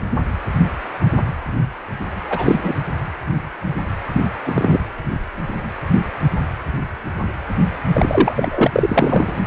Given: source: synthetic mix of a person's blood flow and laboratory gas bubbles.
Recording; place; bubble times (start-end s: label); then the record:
Doppler ultrasound of blood flow; precordium
2.27-2.75 s: bubbles
4.12-4.21 s: bubbles
4.45-4.79 s: bubbles
7.92-8.67 s: bubbles
8.73-9.39 s: bubbles
From the record:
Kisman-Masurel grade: 223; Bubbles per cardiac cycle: several, 3 to 8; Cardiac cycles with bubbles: 10 to 50%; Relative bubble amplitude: loud (0.450 to 0.775); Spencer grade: 2 (many but less than half of the cardiac periods contain bubble signals, singularly or in groups); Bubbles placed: anywhere in the cardiac cycle